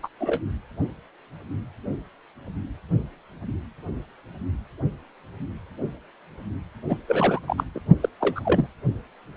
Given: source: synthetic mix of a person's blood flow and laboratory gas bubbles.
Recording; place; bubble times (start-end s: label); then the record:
Doppler ultrasound of blood flow; precordium
0.03-0.08 s: bubbles
0.20-0.40 s: bubbles
6.88-6.99 s: bubbles
7.08-7.40 s: bubbles
7.47-7.64 s: bubbles
7.74-7.79 s: bubbles
8.01-8.09 s: bubbles
8.20-8.40 s: bubbles
8.45-8.67 s: bubbles
From the record:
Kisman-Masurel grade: 222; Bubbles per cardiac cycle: several, 3 to 8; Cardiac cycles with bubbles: 10 to 50%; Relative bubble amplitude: moderate (0.250 to 0.450); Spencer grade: 2 (many but less than half of the cardiac periods contain bubble signals, singularly or in groups); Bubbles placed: only in the low amplitude regions of the cardiac cycle